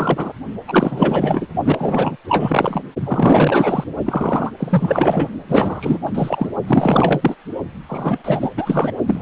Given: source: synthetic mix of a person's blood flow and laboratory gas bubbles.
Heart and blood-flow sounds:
Doppler ultrasound of blood flow; precordium
0.00-0.33 s: bubbles
0.68-1.48 s: bubbles
1.65-2.17 s: bubbles
2.29-2.81 s: bubbles
3.04-3.84 s: bubbles
4.05-4.52 s: bubbles
4.59-5.30 s: bubbles
5.48-5.99 s: bubbles
6.05-6.11 s: bubbles
6.14-6.50 s: bubbles
6.67-7.36 s: bubbles
7.88-8.92 s: bubbles
9.06-9.22 s: bubbles
From the record:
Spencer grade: 4 (maximum detectable bubble signal sounding continuously throughout systole and diastole of every cardiac period, and overriding the amplitude of the normal cardiac signals); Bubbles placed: only in the low amplitude regions of the cardiac cycle

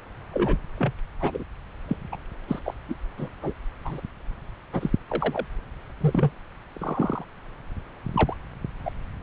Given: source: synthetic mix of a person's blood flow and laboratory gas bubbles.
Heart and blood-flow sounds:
Doppler ultrasound of blood flow; subclavian vein
0.33-0.57 s: bubbles
0.77-0.93 s: bubbles
1.20-1.44 s: bubbles
1.88-1.97 s: bubbles
2.12-2.16 s: bubbles
2.48-2.59 s: bubbles
2.63-2.74 s: bubbles
2.88-2.96 s: bubbles
3.17-3.29 s: bubbles
3.42-3.53 s: bubbles
3.84-4.00 s: bubbles
4.72-4.90 s: bubbles
5.09-5.46 s: bubbles
6.00-6.31 s: bubbles
6.75-7.25 s: bubbles
8.14-8.37 s: bubbles
8.85-8.90 s: bubbles
From the record:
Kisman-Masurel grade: 242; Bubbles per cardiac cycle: several, 3 to 8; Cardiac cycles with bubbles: 100%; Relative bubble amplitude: moderate (0.250 to 0.450); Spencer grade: 3 (all of the cardiac periods contain showers or single bubble signals, but not dominating or overriding the cardiac motion signals); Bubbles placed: anywhere in the cardiac cycle

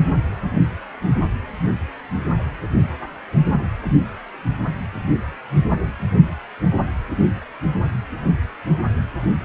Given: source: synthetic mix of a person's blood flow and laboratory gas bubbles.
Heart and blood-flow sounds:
Doppler ultrasound of blood flow; precordium
no bubbles
From the record:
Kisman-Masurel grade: 000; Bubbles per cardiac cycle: 0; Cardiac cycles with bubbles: 0%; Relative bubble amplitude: no bubbles discernible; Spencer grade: 0 (complete lack of bubble signals)

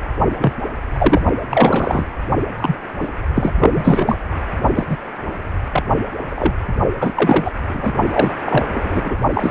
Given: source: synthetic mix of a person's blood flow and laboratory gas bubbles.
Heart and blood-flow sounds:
Doppler ultrasound of blood flow; precordium
0.38-0.53 s: bubbles
0.93-1.22 s: bubbles
1.49-2.04 s: bubbles
2.56-2.76 s: bubbles
3.02-3.10 s: bubbles
3.35-3.51 s: bubbles
3.60-3.70 s: bubbles
3.74-4.18 s: bubbles
4.75-4.85 s: bubbles
4.89-4.97 s: bubbles
5.72-5.83 s: bubbles
6.30-6.53 s: bubbles
7.00-7.12 s: bubbles
7.15-7.51 s: bubbles
7.70-7.94 s: bubbles
8.12-8.34 s: bubbles
8.39-8.66 s: bubbles
8.74-9.16 s: bubbles
9.34-9.51 s: bubbles
From the record:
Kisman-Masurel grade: 243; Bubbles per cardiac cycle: several, 3 to 8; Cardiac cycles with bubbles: 100%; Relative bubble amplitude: loud (0.450 to 0.775); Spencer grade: 3 (all of the cardiac periods contain showers or single bubble signals, but not dominating or overriding the cardiac motion signals); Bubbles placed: only in the low amplitude regions of the cardiac cycle

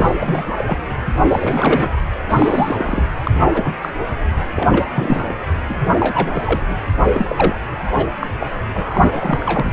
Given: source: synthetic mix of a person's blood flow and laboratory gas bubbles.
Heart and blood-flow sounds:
Doppler ultrasound of blood flow; precordium
0.00-0.52 s: bubbles
0.57-0.77 s: bubbles
1.29-1.94 s: bubbles
2.28-3.05 s: bubbles
3.23-3.31 s: bubbles
3.53-3.73 s: bubbles
3.81-3.90 s: bubbles
4.56-4.86 s: bubbles
4.95-5.35 s: bubbles
5.69-5.77 s: bubbles
5.80-6.62 s: bubbles
6.70-6.74 s: bubbles
7.12-7.56 s: bubbles
7.79-8.09 s: bubbles
8.21-8.27 s: bubbles
8.41-8.47 s: bubbles
8.74-9.71 s: bubbles
From the record:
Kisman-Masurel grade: 242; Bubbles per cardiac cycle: several, 3 to 8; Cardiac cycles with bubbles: 100%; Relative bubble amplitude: moderate (0.250 to 0.450); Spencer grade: 3 (all of the cardiac periods contain showers or single bubble signals, but not dominating or overriding the cardiac motion signals); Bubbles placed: anywhere in the cardiac cycle

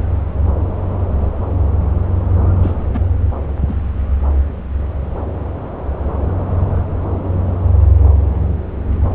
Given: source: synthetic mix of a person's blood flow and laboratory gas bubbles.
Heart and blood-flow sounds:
Doppler ultrasound of blood flow; subclavian vein
2.62-2.75 s: bubbles
2.93-3.00 s: bubbles
3.68-3.75 s: bubbles
From the record:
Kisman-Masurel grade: 112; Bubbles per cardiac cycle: 1 to 2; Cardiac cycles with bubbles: 1 to 10%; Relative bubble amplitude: moderate (0.250 to 0.450); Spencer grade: 1 (occasional bubble signal discernible with the cardiac motion signal, with majority of cardiac periods free of bubbles); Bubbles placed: anywhere in the cardiac cycle

